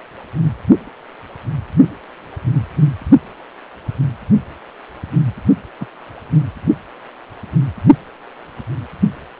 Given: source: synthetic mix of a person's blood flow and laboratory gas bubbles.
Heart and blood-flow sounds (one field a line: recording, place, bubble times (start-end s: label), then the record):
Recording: Doppler ultrasound of blood flow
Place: precordium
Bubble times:
5.79-5.87 s: bubbles
From the record:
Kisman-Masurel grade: 111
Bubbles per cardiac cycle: 1 to 2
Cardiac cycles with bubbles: 1 to 10%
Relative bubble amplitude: barely perceptible (0.100 to 0.250)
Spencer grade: 1 (occasional bubble signal discernible with the cardiac motion signal, with majority of cardiac periods free of bubbles)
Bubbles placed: only in the low amplitude regions of the cardiac cycle